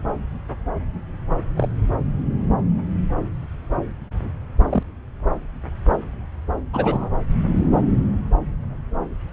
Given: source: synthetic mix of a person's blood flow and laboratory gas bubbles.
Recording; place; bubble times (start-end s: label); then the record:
Doppler ultrasound of blood flow; subclavian vein
1.57-1.68 s: bubbles
4.64-4.83 s: bubbles
6.73-7.10 s: bubbles
From the record:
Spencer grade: 2 (many but less than half of the cardiac periods contain bubble signals, singularly or in groups); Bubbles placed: anywhere in the cardiac cycle